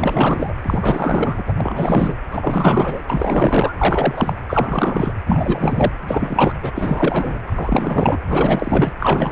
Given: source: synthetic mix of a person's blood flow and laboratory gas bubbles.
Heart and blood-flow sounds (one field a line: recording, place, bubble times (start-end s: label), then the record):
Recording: Doppler ultrasound of blood flow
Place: precordium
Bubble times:
0.00-0.53 s: bubbles
0.62-1.43 s: bubbles
1.46-1.53 s: bubbles
1.57-2.15 s: bubbles
2.31-3.02 s: bubbles
3.09-3.74 s: bubbles
3.78-4.37 s: bubbles
4.49-5.12 s: bubbles
5.26-5.92 s: bubbles
6.07-6.72 s: bubbles
6.76-7.38 s: bubbles
7.46-8.19 s: bubbles
8.29-8.93 s: bubbles
9.00-9.32 s: bubbles
From the record:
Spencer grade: 4 (maximum detectable bubble signal sounding continuously throughout systole and diastole of every cardiac period, and overriding the amplitude of the normal cardiac signals)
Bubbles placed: anywhere in the cardiac cycle